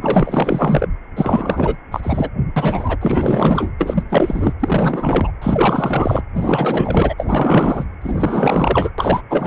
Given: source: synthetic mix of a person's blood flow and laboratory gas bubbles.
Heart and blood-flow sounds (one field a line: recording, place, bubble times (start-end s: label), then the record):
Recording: Doppler ultrasound of blood flow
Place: precordium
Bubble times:
0.01-0.87 s: bubbles
1.16-1.77 s: bubbles
1.92-2.00 s: bubbles
2.03-2.30 s: bubbles
2.56-2.97 s: bubbles
3.01-3.71 s: bubbles
3.78-4.03 s: bubbles
4.09-4.53 s: bubbles
4.59-5.31 s: bubbles
5.42-6.22 s: bubbles
6.35-7.14 s: bubbles
7.18-7.85 s: bubbles
8.01-8.90 s: bubbles
8.98-9.21 s: bubbles
9.29-9.46 s: bubbles
From the record:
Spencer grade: 4 (maximum detectable bubble signal sounding continuously throughout systole and diastole of every cardiac period, and overriding the amplitude of the normal cardiac signals)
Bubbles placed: anywhere in the cardiac cycle